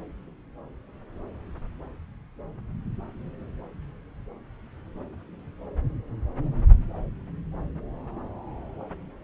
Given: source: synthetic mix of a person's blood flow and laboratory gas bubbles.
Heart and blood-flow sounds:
Doppler ultrasound of blood flow; subclavian vein
no bubbles
From the record:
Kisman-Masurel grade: 000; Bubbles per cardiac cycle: 0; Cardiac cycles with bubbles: 0%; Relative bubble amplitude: no bubbles discernible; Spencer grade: 0 (complete lack of bubble signals)

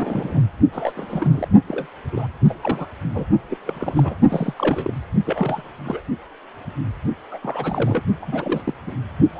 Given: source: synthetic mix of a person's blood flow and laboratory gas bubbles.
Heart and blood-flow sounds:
Doppler ultrasound of blood flow; precordium
0.00-0.41 s: bubbles
0.72-0.93 s: bubbles
0.96-1.48 s: bubbles
1.67-1.86 s: bubbles
2.12-2.27 s: bubbles
2.44-2.54 s: bubbles
2.61-2.86 s: bubbles
3.12-3.25 s: bubbles
3.50-3.58 s: bubbles
3.64-4.16 s: bubbles
4.29-4.54 s: bubbles
4.58-4.93 s: bubbles
5.24-5.71 s: bubbles
5.84-6.01 s: bubbles
7.31-7.38 s: bubbles
7.42-8.04 s: bubbles
8.21-8.62 s: bubbles
8.66-8.74 s: bubbles
8.87-8.92 s: bubbles
9.35-9.40 s: bubbles
From the record:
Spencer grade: 3 (all of the cardiac periods contain showers or single bubble signals, but not dominating or overriding the cardiac motion signals); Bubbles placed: only in the low amplitude regions of the cardiac cycle

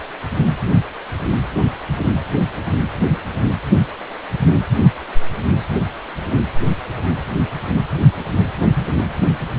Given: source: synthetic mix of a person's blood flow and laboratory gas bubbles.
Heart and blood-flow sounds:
Doppler ultrasound of blood flow; precordium
no bubbles
From the record:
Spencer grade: 0 (complete lack of bubble signals)

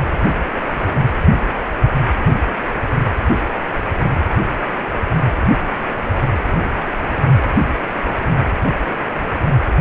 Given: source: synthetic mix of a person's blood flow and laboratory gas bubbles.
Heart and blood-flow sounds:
Doppler ultrasound of blood flow; precordium
0.00-0.02 s: bubbles
From the record:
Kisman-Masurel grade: 122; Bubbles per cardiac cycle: 1 to 2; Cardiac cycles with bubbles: 10 to 50%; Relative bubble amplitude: moderate (0.250 to 0.450); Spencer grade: 2 (many but less than half of the cardiac periods contain bubble signals, singularly or in groups); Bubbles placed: anywhere in the cardiac cycle

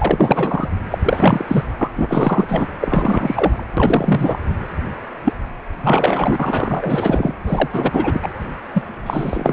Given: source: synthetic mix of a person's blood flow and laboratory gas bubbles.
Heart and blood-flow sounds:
Doppler ultrasound of blood flow; precordium
0.00-0.68 s: bubbles
0.91-0.98 s: bubbles
1.03-1.45 s: bubbles
1.48-1.63 s: bubbles
1.81-1.89 s: bubbles
1.96-2.46 s: bubbles
2.48-2.67 s: bubbles
2.80-3.65 s: bubbles
3.77-4.39 s: bubbles
5.24-5.33 s: bubbles
5.83-7.32 s: bubbles
7.46-7.68 s: bubbles
7.72-8.20 s: bubbles
8.22-8.29 s: bubbles
8.73-8.82 s: bubbles
9.06-9.53 s: bubbles
From the record:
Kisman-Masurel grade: 343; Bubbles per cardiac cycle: rolling drumbeat, 9 or more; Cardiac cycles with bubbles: 100%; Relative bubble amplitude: loud (0.450 to 0.775); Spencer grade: 3 (all of the cardiac periods contain showers or single bubble signals, but not dominating or overriding the cardiac motion signals); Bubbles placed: anywhere in the cardiac cycle

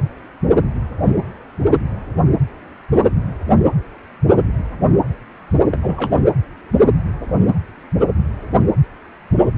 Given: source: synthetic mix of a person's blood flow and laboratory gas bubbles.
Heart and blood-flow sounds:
Doppler ultrasound of blood flow; precordium
5.71-5.78 s: bubbles
5.82-6.23 s: bubbles
From the record:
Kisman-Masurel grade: 212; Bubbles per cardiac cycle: several, 3 to 8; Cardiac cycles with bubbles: 1 to 10%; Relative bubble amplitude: moderate (0.250 to 0.450); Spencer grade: 1 (occasional bubble signal discernible with the cardiac motion signal, with majority of cardiac periods free of bubbles); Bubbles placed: anywhere in the cardiac cycle

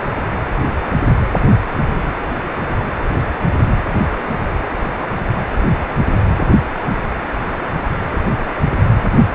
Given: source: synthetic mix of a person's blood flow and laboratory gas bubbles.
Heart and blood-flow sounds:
Doppler ultrasound of blood flow; precordium
no bubbles
From the record:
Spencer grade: 0 (complete lack of bubble signals)

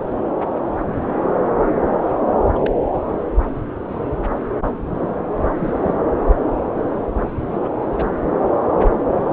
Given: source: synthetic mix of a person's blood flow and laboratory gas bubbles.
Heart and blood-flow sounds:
Doppler ultrasound of blood flow; subclavian vein
2.55-2.59 s: bubbles
2.62-2.71 s: bubbles
5.53-5.94 s: bubbles
6.93-7.01 s: bubbles
7.48-7.69 s: bubbles
7.92-8.06 s: bubbles
From the record:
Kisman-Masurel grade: 122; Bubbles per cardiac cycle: 1 to 2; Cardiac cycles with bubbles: 10 to 50%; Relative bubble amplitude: moderate (0.250 to 0.450); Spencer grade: 2 (many but less than half of the cardiac periods contain bubble signals, singularly or in groups); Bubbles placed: anywhere in the cardiac cycle

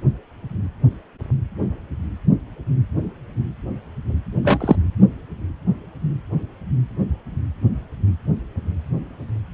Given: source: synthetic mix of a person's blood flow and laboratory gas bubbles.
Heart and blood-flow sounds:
Doppler ultrasound of blood flow; precordium
4.45-4.58 s: bubbles
4.61-4.75 s: bubbles
From the record:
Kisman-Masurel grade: 113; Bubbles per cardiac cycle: 1 to 2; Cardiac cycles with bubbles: 1 to 10%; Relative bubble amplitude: loud (0.450 to 0.775); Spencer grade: 1 (occasional bubble signal discernible with the cardiac motion signal, with majority of cardiac periods free of bubbles); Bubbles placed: anywhere in the cardiac cycle

